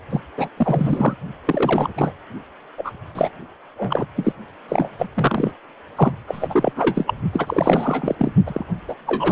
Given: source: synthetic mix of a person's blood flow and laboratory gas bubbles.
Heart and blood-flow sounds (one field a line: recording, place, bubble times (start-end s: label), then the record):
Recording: Doppler ultrasound of blood flow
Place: precordium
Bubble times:
0.10-0.21 s: bubbles
0.37-0.49 s: bubbles
0.56-1.15 s: bubbles
1.45-1.90 s: bubbles
1.97-2.13 s: bubbles
2.77-2.92 s: bubbles
3.15-3.30 s: bubbles
3.77-4.05 s: bubbles
4.16-4.33 s: bubbles
4.68-4.89 s: bubbles
4.98-5.06 s: bubbles
5.14-5.54 s: bubbles
5.96-6.12 s: bubbles
6.27-6.72 s: bubbles
6.76-7.14 s: bubbles
7.33-8.15 s: bubbles
8.19-8.32 s: bubbles
8.46-8.65 s: bubbles
8.88-8.95 s: bubbles
9.07-9.31 s: bubbles
From the record:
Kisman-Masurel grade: 333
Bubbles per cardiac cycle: rolling drumbeat, 9 or more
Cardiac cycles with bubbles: 50 to 99%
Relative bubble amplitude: loud (0.450 to 0.775)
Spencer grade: 3 (all of the cardiac periods contain showers or single bubble signals, but not dominating or overriding the cardiac motion signals)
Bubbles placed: anywhere in the cardiac cycle